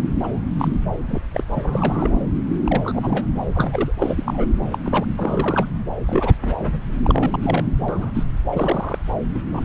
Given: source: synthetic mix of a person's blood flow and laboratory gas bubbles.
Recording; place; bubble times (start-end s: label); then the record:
Doppler ultrasound of blood flow; subclavian vein
0.23-0.28 s: bubbles
0.33-0.40 s: bubbles
0.58-0.68 s: bubbles
1.06-1.21 s: bubbles
1.33-1.44 s: bubbles
1.53-1.60 s: bubbles
1.63-2.17 s: bubbles
2.65-3.25 s: bubbles
3.53-3.93 s: bubbles
3.98-4.46 s: bubbles
4.72-4.78 s: bubbles
4.84-5.06 s: bubbles
5.17-5.66 s: bubbles
6.07-6.34 s: bubbles
6.42-6.80 s: bubbles
7.04-7.38 s: bubbles
7.42-7.64 s: bubbles
7.88-8.23 s: bubbles
8.53-8.98 s: bubbles
9.34-9.39 s: bubbles
9.51-9.61 s: bubbles
From the record:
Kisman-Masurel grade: 242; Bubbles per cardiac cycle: several, 3 to 8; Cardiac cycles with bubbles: 100%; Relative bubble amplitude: moderate (0.250 to 0.450); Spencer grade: 3 (all of the cardiac periods contain showers or single bubble signals, but not dominating or overriding the cardiac motion signals); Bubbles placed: anywhere in the cardiac cycle